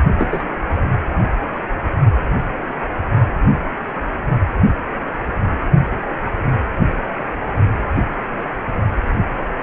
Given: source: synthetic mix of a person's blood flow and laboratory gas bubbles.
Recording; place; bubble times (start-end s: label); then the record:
Doppler ultrasound of blood flow; precordium
0.18-0.27 s: bubbles
0.32-0.43 s: bubbles
From the record:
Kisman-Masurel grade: 113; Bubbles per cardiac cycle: 1 to 2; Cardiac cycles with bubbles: 1 to 10%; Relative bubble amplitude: loud (0.450 to 0.775); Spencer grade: 1 (occasional bubble signal discernible with the cardiac motion signal, with majority of cardiac periods free of bubbles); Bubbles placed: only in the low amplitude regions of the cardiac cycle